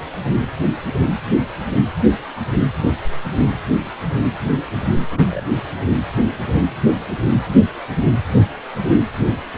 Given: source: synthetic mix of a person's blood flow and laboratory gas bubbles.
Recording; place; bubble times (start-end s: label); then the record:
Doppler ultrasound of blood flow; precordium
5.11-5.61 s: bubbles
From the record:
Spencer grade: 1 (occasional bubble signal discernible with the cardiac motion signal, with majority of cardiac periods free of bubbles); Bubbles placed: anywhere in the cardiac cycle